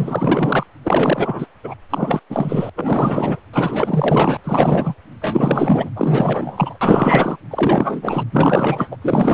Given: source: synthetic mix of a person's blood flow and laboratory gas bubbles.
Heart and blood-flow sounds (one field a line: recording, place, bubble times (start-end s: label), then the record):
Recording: Doppler ultrasound of blood flow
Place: precordium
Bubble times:
0.00-0.66 s: bubbles
0.84-1.47 s: bubbles
1.64-1.74 s: bubbles
1.90-2.20 s: bubbles
2.29-2.70 s: bubbles
2.75-3.40 s: bubbles
3.53-4.37 s: bubbles
4.44-4.94 s: bubbles
5.21-5.90 s: bubbles
5.96-6.77 s: bubbles
6.81-7.37 s: bubbles
7.50-8.23 s: bubbles
8.32-8.96 s: bubbles
9.02-9.34 s: bubbles
From the record:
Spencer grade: 4 (maximum detectable bubble signal sounding continuously throughout systole and diastole of every cardiac period, and overriding the amplitude of the normal cardiac signals)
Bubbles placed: anywhere in the cardiac cycle